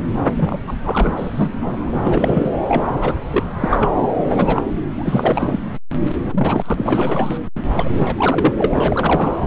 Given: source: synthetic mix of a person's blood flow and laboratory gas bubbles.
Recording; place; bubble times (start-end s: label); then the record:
Doppler ultrasound of blood flow; subclavian vein
0.35-0.58 s: bubbles
0.67-0.75 s: bubbles
0.82-1.51 s: bubbles
1.61-2.52 s: bubbles
2.67-2.83 s: bubbles
3.01-3.17 s: bubbles
3.31-3.44 s: bubbles
3.60-3.90 s: bubbles
4.28-4.62 s: bubbles
4.98-5.60 s: bubbles
6.03-6.74 s: bubbles
6.77-7.38 s: bubbles
7.75-7.90 s: bubbles
7.97-8.53 s: bubbles
8.58-9.47 s: bubbles
From the record:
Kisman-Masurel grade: 343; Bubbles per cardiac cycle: rolling drumbeat, 9 or more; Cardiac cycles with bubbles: 100%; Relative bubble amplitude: loud (0.450 to 0.775); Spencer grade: 3 (all of the cardiac periods contain showers or single bubble signals, but not dominating or overriding the cardiac motion signals); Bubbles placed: anywhere in the cardiac cycle